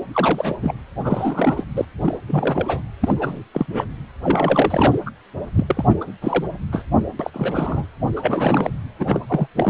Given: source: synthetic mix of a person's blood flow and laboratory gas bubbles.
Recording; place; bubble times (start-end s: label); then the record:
Doppler ultrasound of blood flow; precordium
0.12-0.56 s: bubbles
0.61-0.74 s: bubbles
1.03-1.65 s: bubbles
1.74-1.85 s: bubbles
2.01-2.18 s: bubbles
2.27-2.81 s: bubbles
3.01-3.43 s: bubbles
3.54-3.84 s: bubbles
4.23-4.95 s: bubbles
5.06-5.11 s: bubbles
5.55-6.13 s: bubbles
6.21-6.44 s: bubbles
6.72-6.84 s: bubbles
7.19-7.30 s: bubbles
7.33-7.86 s: bubbles
8.16-8.71 s: bubbles
8.99-9.21 s: bubbles
9.27-9.47 s: bubbles
9.56-9.70 s: bubbles
From the record:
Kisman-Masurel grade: 342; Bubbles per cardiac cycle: rolling drumbeat, 9 or more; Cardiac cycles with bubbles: 100%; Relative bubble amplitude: moderate (0.250 to 0.450); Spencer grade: 3 (all of the cardiac periods contain showers or single bubble signals, but not dominating or overriding the cardiac motion signals); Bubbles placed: anywhere in the cardiac cycle